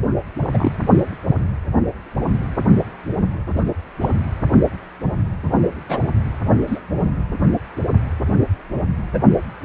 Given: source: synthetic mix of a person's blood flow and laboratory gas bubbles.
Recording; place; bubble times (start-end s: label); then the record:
Doppler ultrasound of blood flow; precordium
0.39-0.77 s: bubbles
3.56-3.63 s: bubbles
4.01-4.13 s: bubbles
5.88-6.00 s: bubbles
6.67-6.79 s: bubbles
9.13-9.19 s: bubbles
From the record:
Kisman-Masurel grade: 122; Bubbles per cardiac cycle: 1 to 2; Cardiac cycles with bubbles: 10 to 50%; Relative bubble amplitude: moderate (0.250 to 0.450); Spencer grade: 2 (many but less than half of the cardiac periods contain bubble signals, singularly or in groups); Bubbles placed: anywhere in the cardiac cycle